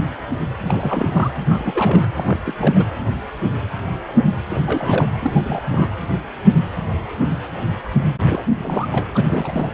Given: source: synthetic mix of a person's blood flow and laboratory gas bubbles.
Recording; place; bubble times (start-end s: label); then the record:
Doppler ultrasound of blood flow; precordium
0.65-1.31 s: bubbles
1.42-2.08 s: bubbles
2.16-2.37 s: bubbles
2.46-2.54 s: bubbles
2.59-2.85 s: bubbles
4.50-5.08 s: bubbles
5.21-5.62 s: bubbles
5.70-5.95 s: bubbles
8.27-8.43 s: bubbles
8.60-9.06 s: bubbles
9.14-9.71 s: bubbles
From the record:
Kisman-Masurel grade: 332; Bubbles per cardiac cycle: rolling drumbeat, 9 or more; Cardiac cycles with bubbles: 50 to 99%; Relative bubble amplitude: moderate (0.250 to 0.450); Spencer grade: 3 (all of the cardiac periods contain showers or single bubble signals, but not dominating or overriding the cardiac motion signals); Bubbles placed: anywhere in the cardiac cycle